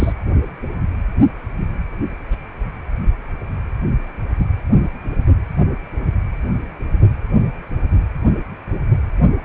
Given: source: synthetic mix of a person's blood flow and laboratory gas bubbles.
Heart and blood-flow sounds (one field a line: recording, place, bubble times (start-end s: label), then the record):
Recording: Doppler ultrasound of blood flow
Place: precordium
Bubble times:
0.00-0.14 s: bubbles
From the record:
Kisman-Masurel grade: 222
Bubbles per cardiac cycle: several, 3 to 8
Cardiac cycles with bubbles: 10 to 50%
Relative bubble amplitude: moderate (0.250 to 0.450)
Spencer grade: 2 (many but less than half of the cardiac periods contain bubble signals, singularly or in groups)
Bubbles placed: anywhere in the cardiac cycle